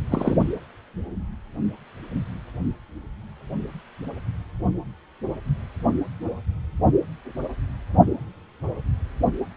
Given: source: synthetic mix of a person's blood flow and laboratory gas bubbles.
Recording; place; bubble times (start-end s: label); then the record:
Doppler ultrasound of blood flow; precordium
0.10-0.35 s: bubbles
From the record:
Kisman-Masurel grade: 213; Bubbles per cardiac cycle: several, 3 to 8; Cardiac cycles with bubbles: 1 to 10%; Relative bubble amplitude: loud (0.450 to 0.775); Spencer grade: 1 (occasional bubble signal discernible with the cardiac motion signal, with majority of cardiac periods free of bubbles); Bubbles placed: only in the low amplitude regions of the cardiac cycle